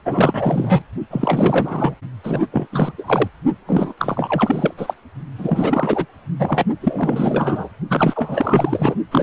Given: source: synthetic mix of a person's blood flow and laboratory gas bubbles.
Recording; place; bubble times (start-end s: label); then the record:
Doppler ultrasound of blood flow; precordium
0.04-0.82 s: bubbles
1.10-1.95 s: bubbles
2.23-2.47 s: bubbles
2.50-2.67 s: bubbles
2.72-2.92 s: bubbles
2.97-3.27 s: bubbles
3.67-3.93 s: bubbles
3.98-4.75 s: bubbles
4.77-4.94 s: bubbles
5.38-6.06 s: bubbles
6.39-6.65 s: bubbles
6.81-7.69 s: bubbles
7.88-8.96 s: bubbles
9.11-9.23 s: bubbles
From the record:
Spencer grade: 4 (maximum detectable bubble signal sounding continuously throughout systole and diastole of every cardiac period, and overriding the amplitude of the normal cardiac signals); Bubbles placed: only in the low amplitude regions of the cardiac cycle